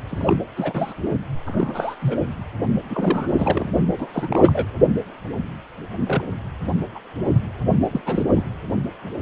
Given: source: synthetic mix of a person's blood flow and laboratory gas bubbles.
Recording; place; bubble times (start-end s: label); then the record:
Doppler ultrasound of blood flow; precordium
0.09-0.40 s: bubbles
0.55-0.94 s: bubbles
1.46-1.96 s: bubbles
1.99-2.26 s: bubbles
2.90-3.70 s: bubbles
3.98-4.07 s: bubbles
4.13-4.66 s: bubbles
6.07-6.22 s: bubbles
6.95-7.00 s: bubbles
7.17-7.39 s: bubbles
7.91-8.00 s: bubbles
8.06-8.23 s: bubbles
8.34-8.44 s: bubbles
From the record:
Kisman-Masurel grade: 232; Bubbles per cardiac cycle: several, 3 to 8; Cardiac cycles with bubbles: 50 to 99%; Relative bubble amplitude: moderate (0.250 to 0.450); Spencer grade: 3 (all of the cardiac periods contain showers or single bubble signals, but not dominating or overriding the cardiac motion signals); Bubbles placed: only in the low amplitude regions of the cardiac cycle